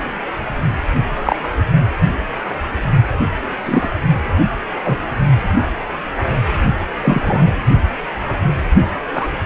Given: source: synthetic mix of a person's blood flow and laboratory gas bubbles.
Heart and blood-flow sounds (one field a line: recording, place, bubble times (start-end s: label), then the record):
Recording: Doppler ultrasound of blood flow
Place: precordium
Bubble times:
1.16-1.50 s: bubbles
3.65-3.90 s: bubbles
4.84-4.98 s: bubbles
7.02-7.52 s: bubbles
9.13-9.28 s: bubbles
From the record:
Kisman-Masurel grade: 123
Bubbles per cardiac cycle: 1 to 2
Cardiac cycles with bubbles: 10 to 50%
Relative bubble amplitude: loud (0.450 to 0.775)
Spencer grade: 2 (many but less than half of the cardiac periods contain bubble signals, singularly or in groups)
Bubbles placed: only in the low amplitude regions of the cardiac cycle